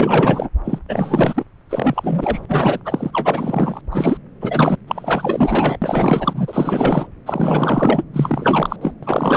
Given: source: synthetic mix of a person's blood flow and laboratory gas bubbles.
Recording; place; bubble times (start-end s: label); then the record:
Doppler ultrasound of blood flow; subclavian vein
0.00-0.49 s: bubbles
0.65-0.79 s: bubbles
0.89-1.45 s: bubbles
1.69-2.40 s: bubbles
2.48-2.80 s: bubbles
2.85-3.81 s: bubbles
3.91-4.18 s: bubbles
4.41-4.77 s: bubbles
4.87-5.78 s: bubbles
5.82-7.07 s: bubbles
7.26-8.03 s: bubbles
8.13-8.76 s: bubbles
8.81-8.93 s: bubbles
9.03-9.37 s: bubbles
From the record:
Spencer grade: 4 (maximum detectable bubble signal sounding continuously throughout systole and diastole of every cardiac period, and overriding the amplitude of the normal cardiac signals); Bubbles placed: anywhere in the cardiac cycle